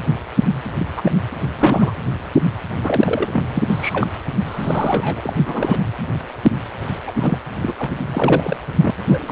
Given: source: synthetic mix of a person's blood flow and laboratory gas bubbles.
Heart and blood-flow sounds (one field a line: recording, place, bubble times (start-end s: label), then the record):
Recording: Doppler ultrasound of blood flow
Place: precordium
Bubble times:
0.79-0.87 s: bubbles
0.97-1.02 s: bubbles
1.05-1.11 s: bubbles
1.58-1.94 s: bubbles
2.83-3.42 s: bubbles
3.52-3.63 s: bubbles
3.69-4.08 s: bubbles
4.46-5.33 s: bubbles
5.46-5.79 s: bubbles
7.07-7.11 s: bubbles
7.15-7.38 s: bubbles
7.62-7.73 s: bubbles
7.78-7.95 s: bubbles
8.12-8.59 s: bubbles
8.79-8.90 s: bubbles
8.97-9.32 s: bubbles
From the record:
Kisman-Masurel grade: 232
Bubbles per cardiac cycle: several, 3 to 8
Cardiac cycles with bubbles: 50 to 99%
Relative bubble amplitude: moderate (0.250 to 0.450)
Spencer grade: 3 (all of the cardiac periods contain showers or single bubble signals, but not dominating or overriding the cardiac motion signals)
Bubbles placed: anywhere in the cardiac cycle